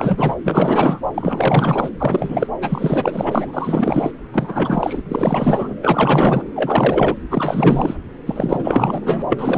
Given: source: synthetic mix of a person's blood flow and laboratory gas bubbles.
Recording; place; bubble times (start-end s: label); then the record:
Doppler ultrasound of blood flow; subclavian vein
0.00-0.35 s: bubbles
0.44-1.02 s: bubbles
1.14-1.90 s: bubbles
1.99-2.47 s: bubbles
2.61-4.11 s: bubbles
4.33-5.02 s: bubbles
5.09-5.74 s: bubbles
5.82-6.44 s: bubbles
6.55-7.16 s: bubbles
7.30-7.96 s: bubbles
8.25-9.22 s: bubbles
9.29-9.58 s: bubbles
From the record:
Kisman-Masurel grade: 444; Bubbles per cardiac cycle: continuous sound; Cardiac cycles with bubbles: 100%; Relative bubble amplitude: maximal (0.775 to 0.999); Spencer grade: 4 (maximum detectable bubble signal sounding continuously throughout systole and diastole of every cardiac period, and overriding the amplitude of the normal cardiac signals); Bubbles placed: anywhere in the cardiac cycle